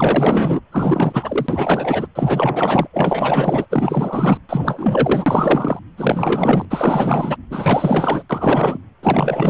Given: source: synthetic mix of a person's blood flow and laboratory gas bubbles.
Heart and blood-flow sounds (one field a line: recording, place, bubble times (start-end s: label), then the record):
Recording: Doppler ultrasound of blood flow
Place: precordium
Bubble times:
0.00-0.60 s: bubbles
0.72-2.07 s: bubbles
2.15-2.88 s: bubbles
2.93-3.67 s: bubbles
3.70-4.38 s: bubbles
4.49-5.79 s: bubbles
5.97-6.65 s: bubbles
6.70-7.37 s: bubbles
7.50-8.23 s: bubbles
8.29-8.78 s: bubbles
9.03-9.50 s: bubbles
From the record:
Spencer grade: 4 (maximum detectable bubble signal sounding continuously throughout systole and diastole of every cardiac period, and overriding the amplitude of the normal cardiac signals)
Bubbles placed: anywhere in the cardiac cycle